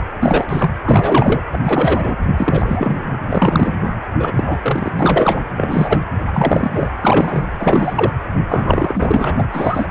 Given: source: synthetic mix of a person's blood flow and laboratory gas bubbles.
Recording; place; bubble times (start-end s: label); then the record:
Doppler ultrasound of blood flow; precordium
0.19-0.70 s: bubbles
0.82-1.42 s: bubbles
1.51-1.60 s: bubbles
1.63-2.16 s: bubbles
2.37-3.16 s: bubbles
3.28-3.74 s: bubbles
4.19-4.32 s: bubbles
4.37-5.40 s: bubbles
5.57-5.99 s: bubbles
6.27-6.90 s: bubbles
7.01-7.43 s: bubbles
7.58-8.12 s: bubbles
8.48-9.36 s: bubbles
9.38-9.44 s: bubbles
9.51-9.88 s: bubbles
From the record:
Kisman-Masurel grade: 343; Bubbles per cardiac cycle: rolling drumbeat, 9 or more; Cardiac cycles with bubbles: 100%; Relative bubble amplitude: loud (0.450 to 0.775); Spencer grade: 3 (all of the cardiac periods contain showers or single bubble signals, but not dominating or overriding the cardiac motion signals); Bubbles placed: anywhere in the cardiac cycle